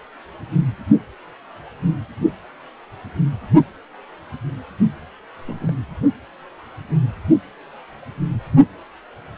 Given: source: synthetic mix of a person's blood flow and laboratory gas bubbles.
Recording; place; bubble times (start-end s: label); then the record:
Doppler ultrasound of blood flow; precordium
5.47-5.74 s: bubbles
From the record:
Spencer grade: 2 (many but less than half of the cardiac periods contain bubble signals, singularly or in groups); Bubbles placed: anywhere in the cardiac cycle